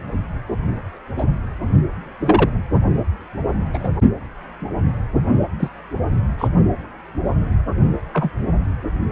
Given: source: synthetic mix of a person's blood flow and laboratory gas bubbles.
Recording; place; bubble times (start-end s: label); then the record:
Doppler ultrasound of blood flow; precordium
1.17-1.24 s: bubbles
2.21-2.49 s: bubbles
3.73-3.89 s: bubbles
5.59-5.69 s: bubbles
6.38-6.48 s: bubbles
8.13-8.30 s: bubbles
From the record:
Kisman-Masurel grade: 123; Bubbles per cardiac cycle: 1 to 2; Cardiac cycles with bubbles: 10 to 50%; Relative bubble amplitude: loud (0.450 to 0.775); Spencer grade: 2 (many but less than half of the cardiac periods contain bubble signals, singularly or in groups); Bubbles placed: only in the low amplitude regions of the cardiac cycle